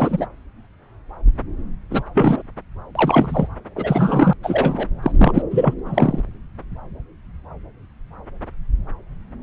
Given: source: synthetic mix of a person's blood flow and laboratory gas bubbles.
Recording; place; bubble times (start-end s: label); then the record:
Doppler ultrasound of blood flow; subclavian vein
0.00-0.27 s: bubbles
1.90-2.03 s: bubbles
2.14-2.42 s: bubbles
2.95-3.47 s: bubbles
3.75-4.33 s: bubbles
4.43-4.88 s: bubbles
5.02-5.12 s: bubbles
5.18-5.42 s: bubbles
5.50-5.74 s: bubbles
5.85-6.21 s: bubbles
From the record:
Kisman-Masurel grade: 223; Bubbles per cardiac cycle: several, 3 to 8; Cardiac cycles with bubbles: 10 to 50%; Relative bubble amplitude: loud (0.450 to 0.775); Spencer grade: 2 (many but less than half of the cardiac periods contain bubble signals, singularly or in groups); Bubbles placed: anywhere in the cardiac cycle